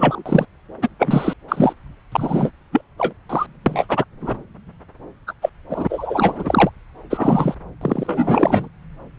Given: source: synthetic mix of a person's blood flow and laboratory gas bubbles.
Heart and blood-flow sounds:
Doppler ultrasound of blood flow; subclavian vein
0.00-0.23 s: bubbles
0.26-0.45 s: bubbles
0.82-0.89 s: bubbles
0.99-1.33 s: bubbles
1.48-1.73 s: bubbles
2.12-2.52 s: bubbles
2.71-2.81 s: bubbles
2.98-3.14 s: bubbles
3.29-3.46 s: bubbles
3.66-3.87 s: bubbles
3.89-4.04 s: bubbles
4.21-4.37 s: bubbles
5.27-5.33 s: bubbles
5.42-5.50 s: bubbles
5.70-6.70 s: bubbles
7.10-7.54 s: bubbles
7.81-8.69 s: bubbles
From the record:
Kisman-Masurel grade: 233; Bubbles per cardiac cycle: several, 3 to 8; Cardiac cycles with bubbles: 50 to 99%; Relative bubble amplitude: loud (0.450 to 0.775); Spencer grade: 3 (all of the cardiac periods contain showers or single bubble signals, but not dominating or overriding the cardiac motion signals); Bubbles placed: anywhere in the cardiac cycle

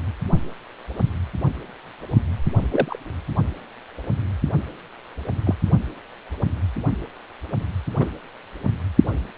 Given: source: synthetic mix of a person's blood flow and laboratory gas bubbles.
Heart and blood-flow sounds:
Doppler ultrasound of blood flow; precordium
2.71-2.98 s: bubbles
5.46-5.54 s: bubbles
7.98-8.10 s: bubbles
From the record:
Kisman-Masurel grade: 122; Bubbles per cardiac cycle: 1 to 2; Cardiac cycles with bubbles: 10 to 50%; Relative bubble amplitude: moderate (0.250 to 0.450); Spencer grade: 2 (many but less than half of the cardiac periods contain bubble signals, singularly or in groups); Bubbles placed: only in the low amplitude regions of the cardiac cycle

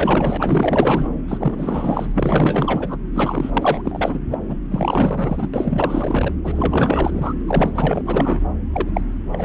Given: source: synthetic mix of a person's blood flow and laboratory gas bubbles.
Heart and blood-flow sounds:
Doppler ultrasound of blood flow; subclavian vein
0.00-1.08 s: bubbles
1.27-2.97 s: bubbles
3.12-3.50 s: bubbles
3.53-3.82 s: bubbles
3.84-4.21 s: bubbles
4.31-4.38 s: bubbles
4.48-4.56 s: bubbles
4.71-5.49 s: bubbles
5.54-6.33 s: bubbles
6.44-7.33 s: bubbles
7.46-8.41 s: bubbles
8.72-8.89 s: bubbles
8.94-9.02 s: bubbles
9.32-9.45 s: bubbles
From the record:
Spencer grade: 4 (maximum detectable bubble signal sounding continuously throughout systole and diastole of every cardiac period, and overriding the amplitude of the normal cardiac signals); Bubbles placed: anywhere in the cardiac cycle

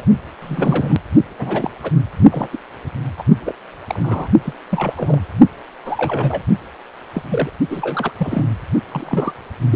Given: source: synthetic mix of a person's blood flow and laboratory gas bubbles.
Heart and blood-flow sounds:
Doppler ultrasound of blood flow; precordium
0.00-0.05 s: bubbles
0.41-0.98 s: bubbles
1.39-1.70 s: bubbles
1.83-1.91 s: bubbles
2.31-2.48 s: bubbles
2.52-2.57 s: bubbles
3.17-3.23 s: bubbles
3.45-3.54 s: bubbles
3.87-4.29 s: bubbles
4.44-4.54 s: bubbles
4.71-5.21 s: bubbles
5.85-6.41 s: bubbles
7.14-7.22 s: bubbles
7.29-7.50 s: bubbles
7.70-8.12 s: bubbles
8.17-8.46 s: bubbles
8.91-9.32 s: bubbles
9.71-9.76 s: bubbles
From the record:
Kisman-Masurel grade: 242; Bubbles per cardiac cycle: several, 3 to 8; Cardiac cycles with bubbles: 100%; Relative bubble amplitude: moderate (0.250 to 0.450); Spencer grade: 3 (all of the cardiac periods contain showers or single bubble signals, but not dominating or overriding the cardiac motion signals); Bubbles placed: only in the low amplitude regions of the cardiac cycle

